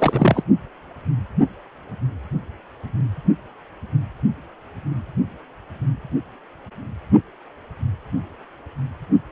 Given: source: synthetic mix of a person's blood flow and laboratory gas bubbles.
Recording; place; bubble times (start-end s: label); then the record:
Doppler ultrasound of blood flow; precordium
0.00-0.43 s: bubbles
From the record:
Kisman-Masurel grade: 212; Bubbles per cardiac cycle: several, 3 to 8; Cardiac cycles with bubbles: 1 to 10%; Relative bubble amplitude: moderate (0.250 to 0.450); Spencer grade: 1 (occasional bubble signal discernible with the cardiac motion signal, with majority of cardiac periods free of bubbles); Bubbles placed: only in the low amplitude regions of the cardiac cycle